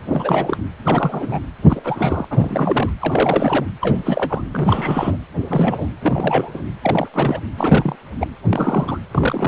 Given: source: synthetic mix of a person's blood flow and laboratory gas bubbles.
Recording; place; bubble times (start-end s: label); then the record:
Doppler ultrasound of blood flow; precordium
0.05-0.57 s: bubbles
0.84-1.40 s: bubbles
1.69-1.81 s: bubbles
1.84-2.25 s: bubbles
2.30-2.90 s: bubbles
3.01-3.65 s: bubbles
3.81-4.42 s: bubbles
4.52-5.17 s: bubbles
5.48-5.87 s: bubbles
6.02-6.64 s: bubbles
6.83-7.08 s: bubbles
7.14-7.40 s: bubbles
7.58-7.96 s: bubbles
8.20-8.27 s: bubbles
8.50-9.00 s: bubbles
9.11-9.48 s: bubbles
From the record:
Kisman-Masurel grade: 342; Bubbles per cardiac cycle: rolling drumbeat, 9 or more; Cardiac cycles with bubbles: 100%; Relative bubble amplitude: moderate (0.250 to 0.450); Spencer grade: 3 (all of the cardiac periods contain showers or single bubble signals, but not dominating or overriding the cardiac motion signals); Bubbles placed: anywhere in the cardiac cycle